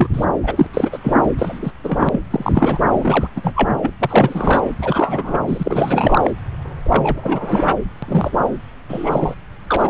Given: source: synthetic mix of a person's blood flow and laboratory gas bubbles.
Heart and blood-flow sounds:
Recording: Doppler ultrasound of blood flow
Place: subclavian vein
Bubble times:
0.00-0.07 s: bubbles
0.13-0.26 s: bubbles
0.43-0.66 s: bubbles
0.73-0.98 s: bubbles
1.03-1.16 s: bubbles
1.38-1.71 s: bubbles
1.83-2.21 s: bubbles
2.31-2.78 s: bubbles
2.99-3.28 s: bubbles
3.36-3.40 s: bubbles
3.43-3.52 s: bubbles
3.56-3.71 s: bubbles
3.81-3.90 s: bubbles
4.00-4.71 s: bubbles
4.82-5.38 s: bubbles
5.47-6.33 s: bubbles
6.84-7.63 s: bubbles
8.02-8.06 s: bubbles
8.08-8.31 s: bubbles
8.89-9.35 s: bubbles
9.69-9.90 s: bubbles
From the record:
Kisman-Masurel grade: 343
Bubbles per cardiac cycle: rolling drumbeat, 9 or more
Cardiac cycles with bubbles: 100%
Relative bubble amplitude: loud (0.450 to 0.775)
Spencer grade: 3 (all of the cardiac periods contain showers or single bubble signals, but not dominating or overriding the cardiac motion signals)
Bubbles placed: anywhere in the cardiac cycle

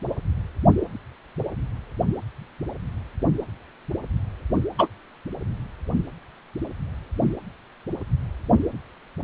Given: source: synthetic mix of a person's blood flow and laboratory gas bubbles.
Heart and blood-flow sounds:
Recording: Doppler ultrasound of blood flow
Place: precordium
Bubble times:
4.79-4.88 s: bubbles
From the record:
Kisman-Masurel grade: 113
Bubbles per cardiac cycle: 1 to 2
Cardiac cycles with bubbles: 1 to 10%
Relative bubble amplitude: loud (0.450 to 0.775)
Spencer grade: 1 (occasional bubble signal discernible with the cardiac motion signal, with majority of cardiac periods free of bubbles)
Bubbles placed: only in the low amplitude regions of the cardiac cycle

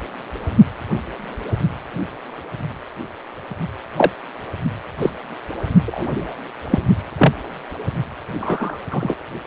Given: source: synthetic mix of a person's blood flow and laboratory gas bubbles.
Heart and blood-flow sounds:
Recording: Doppler ultrasound of blood flow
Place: precordium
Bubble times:
3.96-4.11 s: bubbles
4.98-5.10 s: bubbles
5.86-6.34 s: bubbles
6.70-6.79 s: bubbles
7.18-7.33 s: bubbles
8.39-8.79 s: bubbles
8.90-9.14 s: bubbles
From the record:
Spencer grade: 2 (many but less than half of the cardiac periods contain bubble signals, singularly or in groups)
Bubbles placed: only in the low amplitude regions of the cardiac cycle

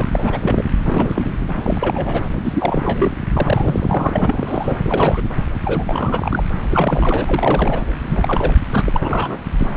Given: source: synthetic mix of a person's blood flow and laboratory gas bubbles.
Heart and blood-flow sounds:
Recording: Doppler ultrasound of blood flow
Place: subclavian vein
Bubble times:
0.00-0.05 s: bubbles
0.10-0.40 s: bubbles
0.43-0.65 s: bubbles
0.85-1.33 s: bubbles
1.56-2.24 s: bubbles
2.44-3.12 s: bubbles
3.34-4.10 s: bubbles
4.12-4.79 s: bubbles
4.86-5.23 s: bubbles
5.65-6.44 s: bubbles
6.71-7.82 s: bubbles
8.02-8.53 s: bubbles
8.69-8.83 s: bubbles
8.88-9.39 s: bubbles
9.58-9.76 s: bubbles
From the record:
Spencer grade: 3 (all of the cardiac periods contain showers or single bubble signals, but not dominating or overriding the cardiac motion signals)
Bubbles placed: anywhere in the cardiac cycle

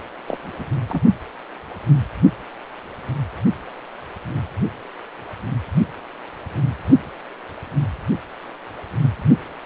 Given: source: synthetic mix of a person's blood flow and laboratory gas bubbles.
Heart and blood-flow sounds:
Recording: Doppler ultrasound of blood flow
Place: precordium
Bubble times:
0.27-0.71 s: bubbles
0.90-1.02 s: bubbles
From the record:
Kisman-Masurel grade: 221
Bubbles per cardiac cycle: several, 3 to 8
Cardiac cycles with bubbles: 10 to 50%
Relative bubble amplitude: barely perceptible (0.100 to 0.250)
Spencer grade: 2 (many but less than half of the cardiac periods contain bubble signals, singularly or in groups)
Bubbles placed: only in the low amplitude regions of the cardiac cycle

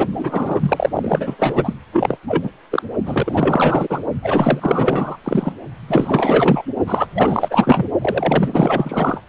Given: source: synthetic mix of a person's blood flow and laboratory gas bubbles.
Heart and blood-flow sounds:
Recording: Doppler ultrasound of blood flow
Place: precordium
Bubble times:
0.00-0.08 s: bubbles
0.16-0.90 s: bubbles
0.94-1.74 s: bubbles
1.93-2.18 s: bubbles
2.28-2.51 s: bubbles
2.71-2.83 s: bubbles
3.06-4.00 s: bubbles
4.22-5.17 s: bubbles
5.24-5.52 s: bubbles
5.88-6.63 s: bubbles
6.86-7.07 s: bubbles
7.14-7.84 s: bubbles
8.01-9.21 s: bubbles
From the record:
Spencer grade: 4 (maximum detectable bubble signal sounding continuously throughout systole and diastole of every cardiac period, and overriding the amplitude of the normal cardiac signals)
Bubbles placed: only in the low amplitude regions of the cardiac cycle

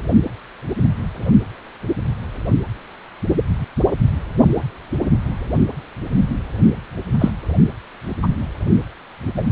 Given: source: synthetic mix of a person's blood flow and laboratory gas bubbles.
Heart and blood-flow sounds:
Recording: Doppler ultrasound of blood flow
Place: precordium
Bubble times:
7.19-7.30 s: bubbles
8.22-8.27 s: bubbles
9.37-9.45 s: bubbles
From the record:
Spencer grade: 2 (many but less than half of the cardiac periods contain bubble signals, singularly or in groups)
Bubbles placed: only in the low amplitude regions of the cardiac cycle

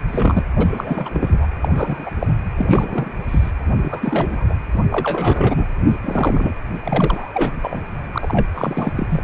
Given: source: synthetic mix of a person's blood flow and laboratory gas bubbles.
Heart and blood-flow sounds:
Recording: Doppler ultrasound of blood flow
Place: precordium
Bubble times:
0.08-0.43 s: bubbles
0.55-1.10 s: bubbles
1.14-1.46 s: bubbles
1.62-2.10 s: bubbles
2.19-2.33 s: bubbles
2.57-3.11 s: bubbles
3.28-3.51 s: bubbles
3.78-4.46 s: bubbles
4.50-4.54 s: bubbles
4.90-5.66 s: bubbles
5.88-5.96 s: bubbles
6.02-6.54 s: bubbles
6.84-7.31 s: bubbles
7.33-7.51 s: bubbles
7.61-7.86 s: bubbles
8.12-8.47 s: bubbles
8.55-8.93 s: bubbles
8.95-9.23 s: bubbles
From the record:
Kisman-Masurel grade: 342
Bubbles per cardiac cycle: rolling drumbeat, 9 or more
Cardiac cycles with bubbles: 100%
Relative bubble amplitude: moderate (0.250 to 0.450)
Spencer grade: 3 (all of the cardiac periods contain showers or single bubble signals, but not dominating or overriding the cardiac motion signals)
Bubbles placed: anywhere in the cardiac cycle

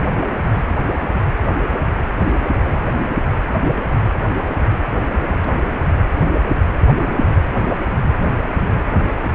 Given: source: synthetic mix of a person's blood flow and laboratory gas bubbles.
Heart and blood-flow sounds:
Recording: Doppler ultrasound of blood flow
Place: precordium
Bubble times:
no bubbles
From the record:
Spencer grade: 0 (complete lack of bubble signals)

